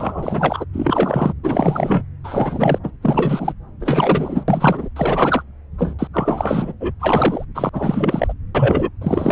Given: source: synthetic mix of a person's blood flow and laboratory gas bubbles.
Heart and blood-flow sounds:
Doppler ultrasound of blood flow; subclavian vein
0.00-0.65 s: bubbles
0.73-1.32 s: bubbles
1.43-2.04 s: bubbles
2.24-2.79 s: bubbles
2.83-2.90 s: bubbles
3.02-3.52 s: bubbles
3.80-4.44 s: bubbles
4.48-4.89 s: bubbles
4.95-5.43 s: bubbles
5.78-5.94 s: bubbles
5.99-6.08 s: bubbles
6.13-6.72 s: bubbles
6.80-6.92 s: bubbles
7.00-7.45 s: bubbles
7.54-7.70 s: bubbles
7.73-8.33 s: bubbles
8.55-8.90 s: bubbles
9.01-9.32 s: bubbles
From the record:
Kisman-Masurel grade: 343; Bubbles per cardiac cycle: rolling drumbeat, 9 or more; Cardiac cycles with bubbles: 100%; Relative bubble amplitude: loud (0.450 to 0.775); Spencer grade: 3 (all of the cardiac periods contain showers or single bubble signals, but not dominating or overriding the cardiac motion signals); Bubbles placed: anywhere in the cardiac cycle

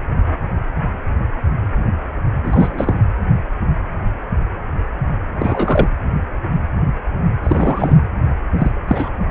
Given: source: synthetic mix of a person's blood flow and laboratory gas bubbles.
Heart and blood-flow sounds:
Doppler ultrasound of blood flow; precordium
2.43-2.99 s: bubbles
5.37-5.89 s: bubbles
7.43-7.97 s: bubbles
8.58-8.71 s: bubbles
8.87-9.09 s: bubbles
From the record:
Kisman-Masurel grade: 223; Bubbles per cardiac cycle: several, 3 to 8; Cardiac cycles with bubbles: 10 to 50%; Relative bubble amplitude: loud (0.450 to 0.775); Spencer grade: 2 (many but less than half of the cardiac periods contain bubble signals, singularly or in groups); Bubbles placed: anywhere in the cardiac cycle

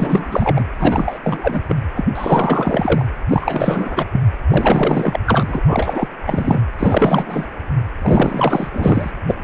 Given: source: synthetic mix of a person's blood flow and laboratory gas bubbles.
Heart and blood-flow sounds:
Doppler ultrasound of blood flow; precordium
0.00-0.64 s: bubbles
0.77-1.19 s: bubbles
1.23-1.62 s: bubbles
1.68-1.76 s: bubbles
1.94-2.05 s: bubbles
2.15-3.06 s: bubbles
3.29-4.05 s: bubbles
4.12-4.21 s: bubbles
4.49-5.20 s: bubbles
5.26-5.61 s: bubbles
5.67-6.08 s: bubbles
6.21-6.62 s: bubbles
6.78-7.48 s: bubbles
8.02-8.70 s: bubbles
8.73-9.11 s: bubbles
9.27-9.35 s: bubbles
From the record:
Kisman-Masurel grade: 444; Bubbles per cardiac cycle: continuous sound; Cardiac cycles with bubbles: 100%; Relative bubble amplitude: maximal (0.775 to 0.999); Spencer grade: 4 (maximum detectable bubble signal sounding continuously throughout systole and diastole of every cardiac period, and overriding the amplitude of the normal cardiac signals); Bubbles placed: anywhere in the cardiac cycle

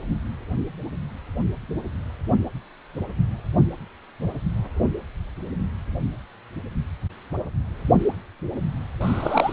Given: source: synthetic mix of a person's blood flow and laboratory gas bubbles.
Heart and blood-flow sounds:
Doppler ultrasound of blood flow; precordium
9.01-9.53 s: bubbles
From the record:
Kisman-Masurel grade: 212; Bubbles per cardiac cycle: several, 3 to 8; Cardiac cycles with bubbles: 1 to 10%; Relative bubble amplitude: moderate (0.250 to 0.450); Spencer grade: 1 (occasional bubble signal discernible with the cardiac motion signal, with majority of cardiac periods free of bubbles); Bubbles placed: anywhere in the cardiac cycle

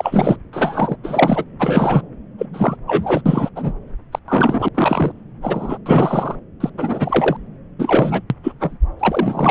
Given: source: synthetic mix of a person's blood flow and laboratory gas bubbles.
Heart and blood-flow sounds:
Doppler ultrasound of blood flow; subclavian vein
0.00-0.37 s: bubbles
0.53-0.96 s: bubbles
1.04-1.45 s: bubbles
1.59-2.02 s: bubbles
2.38-2.47 s: bubbles
2.53-2.76 s: bubbles
2.87-3.22 s: bubbles
3.25-3.49 s: bubbles
3.55-3.73 s: bubbles
4.12-4.19 s: bubbles
4.28-4.68 s: bubbles
4.75-5.12 s: bubbles
5.42-5.78 s: bubbles
5.86-6.35 s: bubbles
6.60-6.70 s: bubbles
6.77-7.37 s: bubbles
7.78-8.22 s: bubbles
8.30-8.36 s: bubbles
8.43-8.53 s: bubbles
8.60-8.78 s: bubbles
8.99-9.51 s: bubbles
From the record:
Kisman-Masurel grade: 243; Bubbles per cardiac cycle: several, 3 to 8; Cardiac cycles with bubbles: 100%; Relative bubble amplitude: loud (0.450 to 0.775); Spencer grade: 3 (all of the cardiac periods contain showers or single bubble signals, but not dominating or overriding the cardiac motion signals); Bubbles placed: anywhere in the cardiac cycle

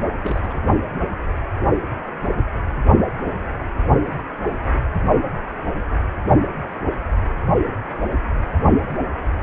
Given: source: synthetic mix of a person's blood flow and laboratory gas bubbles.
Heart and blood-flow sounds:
Doppler ultrasound of blood flow; precordium
0.00-0.07 s: bubbles
0.23-0.61 s: bubbles
From the record:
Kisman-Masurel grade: 211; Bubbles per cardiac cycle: several, 3 to 8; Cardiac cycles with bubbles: 1 to 10%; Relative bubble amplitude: barely perceptible (0.100 to 0.250); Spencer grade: 1 (occasional bubble signal discernible with the cardiac motion signal, with majority of cardiac periods free of bubbles); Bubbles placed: only in the low amplitude regions of the cardiac cycle

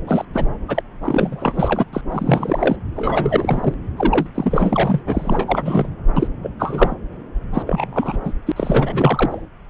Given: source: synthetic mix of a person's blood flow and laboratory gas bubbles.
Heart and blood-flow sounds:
Doppler ultrasound of blood flow; subclavian vein
0.07-0.25 s: bubbles
0.33-0.45 s: bubbles
0.68-0.81 s: bubbles
1.02-1.85 s: bubbles
1.93-2.02 s: bubbles
2.11-2.76 s: bubbles
2.96-3.74 s: bubbles
3.96-4.27 s: bubbles
4.34-5.01 s: bubbles
5.07-5.90 s: bubbles
6.16-6.28 s: bubbles
6.44-6.51 s: bubbles
6.60-6.95 s: bubbles
7.54-7.62 s: bubbles
7.67-8.17 s: bubbles
8.24-8.33 s: bubbles
8.46-8.52 s: bubbles
8.56-9.42 s: bubbles
From the record:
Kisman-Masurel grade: 332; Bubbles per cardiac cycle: rolling drumbeat, 9 or more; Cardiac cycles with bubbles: 50 to 99%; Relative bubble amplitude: moderate (0.250 to 0.450); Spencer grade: 3 (all of the cardiac periods contain showers or single bubble signals, but not dominating or overriding the cardiac motion signals); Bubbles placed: anywhere in the cardiac cycle

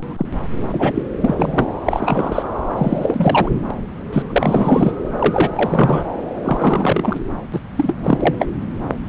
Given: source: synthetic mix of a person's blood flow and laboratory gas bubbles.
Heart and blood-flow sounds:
Doppler ultrasound of blood flow; subclavian vein
0.00-0.14 s: bubbles
0.17-0.26 s: bubbles
0.69-1.02 s: bubbles
1.22-1.35 s: bubbles
1.38-1.74 s: bubbles
1.85-2.42 s: bubbles
2.78-3.49 s: bubbles
3.70-3.75 s: bubbles
4.12-4.23 s: bubbles
4.30-4.92 s: bubbles
5.18-5.49 s: bubbles
5.56-6.05 s: bubbles
6.44-7.19 s: bubbles
7.54-7.60 s: bubbles
7.77-7.95 s: bubbles
8.04-8.35 s: bubbles
8.39-8.48 s: bubbles
From the record:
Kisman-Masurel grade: 243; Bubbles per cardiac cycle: several, 3 to 8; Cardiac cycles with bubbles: 100%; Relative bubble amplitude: loud (0.450 to 0.775); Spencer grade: 3 (all of the cardiac periods contain showers or single bubble signals, but not dominating or overriding the cardiac motion signals); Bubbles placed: anywhere in the cardiac cycle

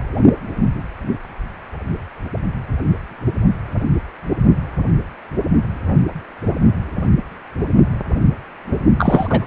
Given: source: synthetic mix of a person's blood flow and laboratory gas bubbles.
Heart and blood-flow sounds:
Doppler ultrasound of blood flow; precordium
8.98-9.47 s: bubbles
From the record:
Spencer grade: 1 (occasional bubble signal discernible with the cardiac motion signal, with majority of cardiac periods free of bubbles); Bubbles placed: only in the low amplitude regions of the cardiac cycle

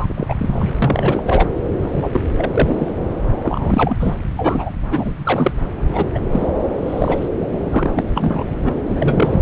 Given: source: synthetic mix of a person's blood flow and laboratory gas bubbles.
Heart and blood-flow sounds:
Doppler ultrasound of blood flow; subclavian vein
0.00-0.26 s: bubbles
0.29-0.34 s: bubbles
0.39-0.74 s: bubbles
0.82-1.23 s: bubbles
1.26-1.48 s: bubbles
1.82-2.09 s: bubbles
2.12-2.21 s: bubbles
2.36-2.93 s: bubbles
3.42-3.95 s: bubbles
4.00-4.14 s: bubbles
4.37-4.71 s: bubbles
4.90-5.12 s: bubbles
5.24-5.52 s: bubbles
5.92-6.05 s: bubbles
6.14-6.19 s: bubbles
6.31-6.47 s: bubbles
6.85-7.29 s: bubbles
7.69-8.04 s: bubbles
8.15-8.44 s: bubbles
8.65-8.73 s: bubbles
8.87-9.42 s: bubbles
From the record:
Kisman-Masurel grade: 243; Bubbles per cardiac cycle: several, 3 to 8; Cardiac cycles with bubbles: 100%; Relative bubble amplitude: loud (0.450 to 0.775); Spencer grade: 3 (all of the cardiac periods contain showers or single bubble signals, but not dominating or overriding the cardiac motion signals); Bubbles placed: anywhere in the cardiac cycle

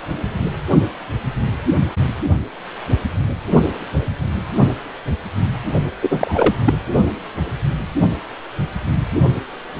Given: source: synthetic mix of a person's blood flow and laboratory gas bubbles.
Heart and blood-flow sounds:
Doppler ultrasound of blood flow; precordium
6.01-6.54 s: bubbles
6.64-6.73 s: bubbles
From the record:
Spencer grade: 1 (occasional bubble signal discernible with the cardiac motion signal, with majority of cardiac periods free of bubbles); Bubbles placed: only in the low amplitude regions of the cardiac cycle

